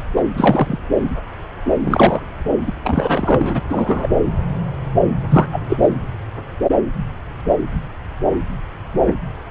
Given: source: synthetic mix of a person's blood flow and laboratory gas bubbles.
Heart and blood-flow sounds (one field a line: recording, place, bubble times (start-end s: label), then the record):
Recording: Doppler ultrasound of blood flow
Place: subclavian vein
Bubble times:
0.15-0.21 s: bubbles
0.36-0.79 s: bubbles
1.80-2.21 s: bubbles
2.66-2.72 s: bubbles
2.83-3.61 s: bubbles
3.68-4.08 s: bubbles
5.29-5.46 s: bubbles
5.52-5.61 s: bubbles
5.69-5.78 s: bubbles
5.82-5.90 s: bubbles
From the record:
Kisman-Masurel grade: 223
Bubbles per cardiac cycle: several, 3 to 8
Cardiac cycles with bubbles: 10 to 50%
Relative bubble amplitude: loud (0.450 to 0.775)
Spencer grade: 2 (many but less than half of the cardiac periods contain bubble signals, singularly or in groups)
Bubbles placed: anywhere in the cardiac cycle